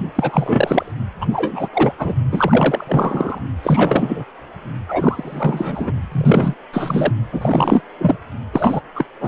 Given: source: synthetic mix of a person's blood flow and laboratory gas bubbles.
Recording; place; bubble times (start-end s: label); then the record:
Doppler ultrasound of blood flow; precordium
0.15-0.92 s: bubbles
1.21-1.26 s: bubbles
1.32-1.69 s: bubbles
1.73-1.92 s: bubbles
1.98-2.14 s: bubbles
2.31-2.85 s: bubbles
2.87-3.40 s: bubbles
3.62-4.25 s: bubbles
4.88-5.92 s: bubbles
6.11-6.54 s: bubbles
6.72-7.13 s: bubbles
7.32-7.81 s: bubbles
7.99-8.17 s: bubbles
8.53-8.80 s: bubbles
8.95-9.05 s: bubbles
9.20-9.28 s: bubbles
From the record:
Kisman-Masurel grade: 343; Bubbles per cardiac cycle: rolling drumbeat, 9 or more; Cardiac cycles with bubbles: 100%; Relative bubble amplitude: loud (0.450 to 0.775); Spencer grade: 3 (all of the cardiac periods contain showers or single bubble signals, but not dominating or overriding the cardiac motion signals); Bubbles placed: anywhere in the cardiac cycle